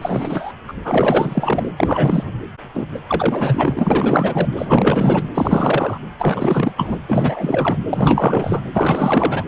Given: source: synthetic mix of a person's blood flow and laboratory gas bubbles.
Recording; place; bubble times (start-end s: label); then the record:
Doppler ultrasound of blood flow; precordium
0.01-0.53 s: bubbles
0.68-0.73 s: bubbles
0.84-1.71 s: bubbles
1.77-2.41 s: bubbles
2.74-2.85 s: bubbles
2.94-3.00 s: bubbles
3.08-4.48 s: bubbles
4.55-5.29 s: bubbles
5.34-5.98 s: bubbles
6.18-6.72 s: bubbles
6.77-6.96 s: bubbles
7.08-7.77 s: bubbles
7.92-8.61 s: bubbles
8.73-9.45 s: bubbles
From the record:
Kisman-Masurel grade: 444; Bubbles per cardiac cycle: continuous sound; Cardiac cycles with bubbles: 100%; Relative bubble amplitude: maximal (0.775 to 0.999); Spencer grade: 4 (maximum detectable bubble signal sounding continuously throughout systole and diastole of every cardiac period, and overriding the amplitude of the normal cardiac signals); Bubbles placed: anywhere in the cardiac cycle